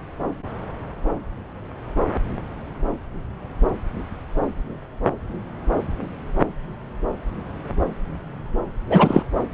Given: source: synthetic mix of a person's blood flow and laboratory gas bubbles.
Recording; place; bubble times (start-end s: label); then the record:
Doppler ultrasound of blood flow; subclavian vein
8.89-9.23 s: bubbles
From the record:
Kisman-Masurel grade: 213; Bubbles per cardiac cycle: several, 3 to 8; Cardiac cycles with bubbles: 1 to 10%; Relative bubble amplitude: loud (0.450 to 0.775); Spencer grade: 1 (occasional bubble signal discernible with the cardiac motion signal, with majority of cardiac periods free of bubbles); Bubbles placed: anywhere in the cardiac cycle